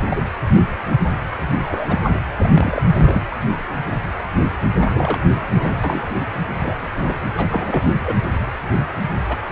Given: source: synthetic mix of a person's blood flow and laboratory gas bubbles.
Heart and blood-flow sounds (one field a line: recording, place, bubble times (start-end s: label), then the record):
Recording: Doppler ultrasound of blood flow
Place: precordium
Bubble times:
0.09-0.22 s: bubbles
1.61-1.99 s: bubbles
2.03-2.11 s: bubbles
2.38-2.51 s: bubbles
2.55-2.82 s: bubbles
2.86-3.22 s: bubbles
4.82-5.18 s: bubbles
5.53-5.75 s: bubbles
5.83-6.04 s: bubbles
6.15-6.25 s: bubbles
6.58-6.90 s: bubbles
7.07-7.18 s: bubbles
7.36-7.91 s: bubbles
8.04-8.15 s: bubbles
9.29-9.37 s: bubbles
9.50-9.52 s: bubbles
From the record:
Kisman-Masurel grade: 232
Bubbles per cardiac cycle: several, 3 to 8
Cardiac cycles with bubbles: 50 to 99%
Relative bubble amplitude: moderate (0.250 to 0.450)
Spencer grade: 3 (all of the cardiac periods contain showers or single bubble signals, but not dominating or overriding the cardiac motion signals)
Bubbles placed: anywhere in the cardiac cycle